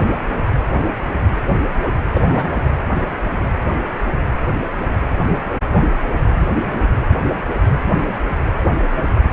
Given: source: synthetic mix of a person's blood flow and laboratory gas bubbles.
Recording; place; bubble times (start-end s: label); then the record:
Doppler ultrasound of blood flow; precordium
2.14-2.62 s: bubbles
From the record:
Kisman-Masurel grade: 212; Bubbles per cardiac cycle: several, 3 to 8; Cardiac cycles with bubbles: 1 to 10%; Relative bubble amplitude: moderate (0.250 to 0.450); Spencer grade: 1 (occasional bubble signal discernible with the cardiac motion signal, with majority of cardiac periods free of bubbles); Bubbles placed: anywhere in the cardiac cycle